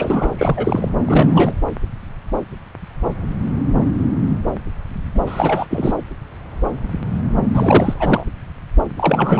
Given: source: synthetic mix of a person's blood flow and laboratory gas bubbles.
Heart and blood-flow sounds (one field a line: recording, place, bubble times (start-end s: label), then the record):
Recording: Doppler ultrasound of blood flow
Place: subclavian vein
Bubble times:
0.00-0.31 s: bubbles
0.38-0.89 s: bubbles
1.06-1.54 s: bubbles
5.14-5.20 s: bubbles
5.26-5.66 s: bubbles
5.70-5.95 s: bubbles
7.54-8.24 s: bubbles
8.97-9.40 s: bubbles
From the record:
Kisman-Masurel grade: 333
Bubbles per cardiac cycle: rolling drumbeat, 9 or more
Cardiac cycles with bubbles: 50 to 99%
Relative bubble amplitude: loud (0.450 to 0.775)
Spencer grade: 3 (all of the cardiac periods contain showers or single bubble signals, but not dominating or overriding the cardiac motion signals)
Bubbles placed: anywhere in the cardiac cycle